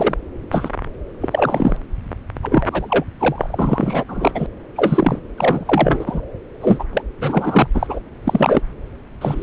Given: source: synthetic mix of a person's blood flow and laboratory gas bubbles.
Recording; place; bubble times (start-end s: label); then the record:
Doppler ultrasound of blood flow; subclavian vein
0.00-0.14 s: bubbles
0.51-0.70 s: bubbles
1.21-1.77 s: bubbles
2.42-2.67 s: bubbles
2.71-3.04 s: bubbles
3.19-4.04 s: bubbles
4.08-4.32 s: bubbles
4.34-4.46 s: bubbles
4.75-5.19 s: bubbles
5.38-6.21 s: bubbles
6.61-6.84 s: bubbles
6.93-7.02 s: bubbles
7.21-7.67 s: bubbles
7.74-8.00 s: bubbles
8.25-8.61 s: bubbles
9.21-9.43 s: bubbles
From the record:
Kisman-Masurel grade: 243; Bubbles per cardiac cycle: several, 3 to 8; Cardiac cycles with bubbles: 100%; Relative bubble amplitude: loud (0.450 to 0.775); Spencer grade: 3 (all of the cardiac periods contain showers or single bubble signals, but not dominating or overriding the cardiac motion signals); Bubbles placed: anywhere in the cardiac cycle